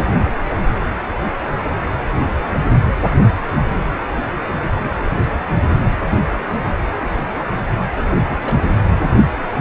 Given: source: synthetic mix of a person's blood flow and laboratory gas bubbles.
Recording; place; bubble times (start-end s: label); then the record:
Doppler ultrasound of blood flow; precordium
7.96-8.80 s: bubbles
From the record:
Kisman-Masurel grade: 211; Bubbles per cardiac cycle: several, 3 to 8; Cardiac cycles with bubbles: 1 to 10%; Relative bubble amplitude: barely perceptible (0.100 to 0.250); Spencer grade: 1 (occasional bubble signal discernible with the cardiac motion signal, with majority of cardiac periods free of bubbles); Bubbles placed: anywhere in the cardiac cycle